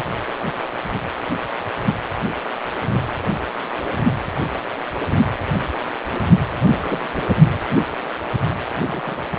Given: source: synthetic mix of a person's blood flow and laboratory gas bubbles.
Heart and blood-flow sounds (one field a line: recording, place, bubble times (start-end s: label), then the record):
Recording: Doppler ultrasound of blood flow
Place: precordium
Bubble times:
6.62-7.00 s: bubbles
7.13-7.24 s: bubbles
7.42-7.59 s: bubbles
8.87-9.28 s: bubbles
From the record:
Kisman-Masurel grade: 221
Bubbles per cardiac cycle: several, 3 to 8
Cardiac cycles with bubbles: 10 to 50%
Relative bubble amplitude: barely perceptible (0.100 to 0.250)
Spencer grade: 2 (many but less than half of the cardiac periods contain bubble signals, singularly or in groups)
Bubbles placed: anywhere in the cardiac cycle